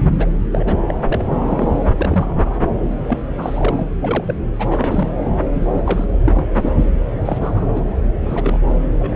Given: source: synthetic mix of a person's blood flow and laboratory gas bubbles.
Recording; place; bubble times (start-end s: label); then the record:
Doppler ultrasound of blood flow; subclavian vein
0.18-0.26 s: bubbles
0.51-0.74 s: bubbles
0.88-0.94 s: bubbles
1.06-1.33 s: bubbles
1.51-1.69 s: bubbles
1.97-2.56 s: bubbles
3.08-3.19 s: bubbles
3.37-3.87 s: bubbles
4.00-4.34 s: bubbles
4.59-5.08 s: bubbles
5.52-5.82 s: bubbles
5.85-6.05 s: bubbles
6.24-6.45 s: bubbles
6.62-6.72 s: bubbles
7.25-7.98 s: bubbles
8.26-8.59 s: bubbles
8.99-9.15 s: bubbles
From the record:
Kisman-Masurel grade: 242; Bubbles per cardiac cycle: several, 3 to 8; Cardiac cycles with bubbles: 100%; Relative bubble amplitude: moderate (0.250 to 0.450); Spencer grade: 3 (all of the cardiac periods contain showers or single bubble signals, but not dominating or overriding the cardiac motion signals); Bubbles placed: anywhere in the cardiac cycle